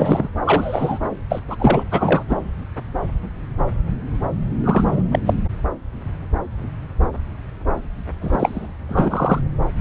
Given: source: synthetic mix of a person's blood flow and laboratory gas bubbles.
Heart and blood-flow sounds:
Doppler ultrasound of blood flow; subclavian vein
0.00-0.29 s: bubbles
0.46-0.99 s: bubbles
1.30-1.40 s: bubbles
1.48-1.56 s: bubbles
1.59-1.84 s: bubbles
1.91-2.23 s: bubbles
2.28-2.36 s: bubbles
4.64-5.02 s: bubbles
5.11-5.19 s: bubbles
5.25-5.33 s: bubbles
8.21-8.67 s: bubbles
8.89-9.41 s: bubbles
From the record:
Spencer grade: 3 (all of the cardiac periods contain showers or single bubble signals, but not dominating or overriding the cardiac motion signals); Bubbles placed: anywhere in the cardiac cycle

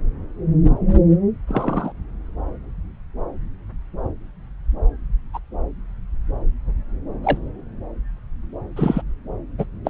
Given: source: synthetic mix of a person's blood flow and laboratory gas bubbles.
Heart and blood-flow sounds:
Doppler ultrasound of blood flow; subclavian vein
1.47-1.92 s: bubbles
5.33-5.38 s: bubbles
7.23-7.38 s: bubbles
8.76-9.02 s: bubbles
9.58-9.65 s: bubbles
9.85-9.89 s: bubbles
From the record:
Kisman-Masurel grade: 122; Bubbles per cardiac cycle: 1 to 2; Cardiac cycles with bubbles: 10 to 50%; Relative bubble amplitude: moderate (0.250 to 0.450); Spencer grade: 2 (many but less than half of the cardiac periods contain bubble signals, singularly or in groups); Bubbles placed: anywhere in the cardiac cycle

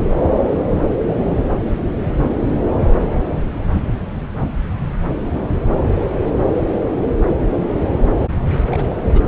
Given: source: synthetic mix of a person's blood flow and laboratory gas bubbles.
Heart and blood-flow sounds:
Doppler ultrasound of blood flow; subclavian vein
8.66-8.96 s: bubbles
9.12-9.21 s: bubbles
From the record:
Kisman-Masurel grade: 211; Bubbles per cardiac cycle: several, 3 to 8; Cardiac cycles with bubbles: 1 to 10%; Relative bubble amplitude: barely perceptible (0.100 to 0.250); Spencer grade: 1 (occasional bubble signal discernible with the cardiac motion signal, with majority of cardiac periods free of bubbles); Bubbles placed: anywhere in the cardiac cycle

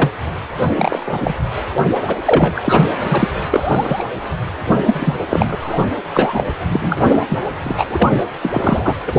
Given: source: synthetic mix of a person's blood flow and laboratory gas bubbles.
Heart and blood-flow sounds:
Doppler ultrasound of blood flow; precordium
0.00-0.10 s: bubbles
0.76-1.33 s: bubbles
1.78-1.85 s: bubbles
2.08-2.16 s: bubbles
2.25-2.92 s: bubbles
3.01-3.28 s: bubbles
3.50-4.04 s: bubbles
4.85-5.14 s: bubbles
5.29-5.55 s: bubbles
5.61-5.85 s: bubbles
6.13-6.44 s: bubbles
6.71-7.18 s: bubbles
7.29-7.41 s: bubbles
7.63-7.85 s: bubbles
7.90-8.24 s: bubbles
8.41-8.96 s: bubbles
9.07-9.19 s: bubbles
From the record:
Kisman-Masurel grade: 243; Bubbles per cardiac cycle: several, 3 to 8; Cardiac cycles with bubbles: 100%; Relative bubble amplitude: loud (0.450 to 0.775); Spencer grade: 3 (all of the cardiac periods contain showers or single bubble signals, but not dominating or overriding the cardiac motion signals); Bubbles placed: anywhere in the cardiac cycle

